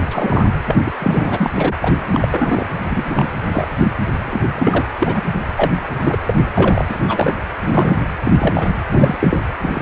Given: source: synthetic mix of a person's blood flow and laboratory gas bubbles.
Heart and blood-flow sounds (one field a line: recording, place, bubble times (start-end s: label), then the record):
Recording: Doppler ultrasound of blood flow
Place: precordium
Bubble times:
0.10-0.46 s: bubbles
0.65-0.76 s: bubbles
0.86-0.91 s: bubbles
0.98-1.74 s: bubbles
1.81-1.94 s: bubbles
2.10-2.67 s: bubbles
2.83-3.29 s: bubbles
3.49-3.69 s: bubbles
3.83-3.94 s: bubbles
4.26-4.42 s: bubbles
4.54-4.86 s: bubbles
5.01-5.23 s: bubbles
5.57-5.72 s: bubbles
6.01-6.17 s: bubbles
6.27-6.42 s: bubbles
6.55-6.85 s: bubbles
6.89-6.96 s: bubbles
7.08-7.33 s: bubbles
7.61-8.00 s: bubbles
8.24-8.32 s: bubbles
8.38-8.68 s: bubbles
8.89-9.42 s: bubbles
9.62-9.82 s: bubbles
From the record:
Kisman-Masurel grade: 243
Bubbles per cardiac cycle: several, 3 to 8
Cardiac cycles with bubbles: 100%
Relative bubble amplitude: loud (0.450 to 0.775)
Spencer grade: 3 (all of the cardiac periods contain showers or single bubble signals, but not dominating or overriding the cardiac motion signals)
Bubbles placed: anywhere in the cardiac cycle